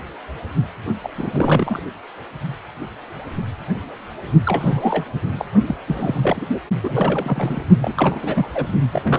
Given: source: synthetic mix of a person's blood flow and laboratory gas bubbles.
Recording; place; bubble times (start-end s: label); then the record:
Doppler ultrasound of blood flow; precordium
1.04-1.09 s: bubbles
1.18-1.80 s: bubbles
4.45-5.05 s: bubbles
5.38-5.46 s: bubbles
5.66-5.76 s: bubbles
5.87-6.47 s: bubbles
6.83-7.64 s: bubbles
7.81-8.19 s: bubbles
8.22-8.49 s: bubbles
8.54-8.67 s: bubbles
8.92-9.19 s: bubbles
From the record:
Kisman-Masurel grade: 332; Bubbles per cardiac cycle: rolling drumbeat, 9 or more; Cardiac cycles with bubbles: 50 to 99%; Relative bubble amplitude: moderate (0.250 to 0.450); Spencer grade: 3 (all of the cardiac periods contain showers or single bubble signals, but not dominating or overriding the cardiac motion signals); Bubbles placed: only in the low amplitude regions of the cardiac cycle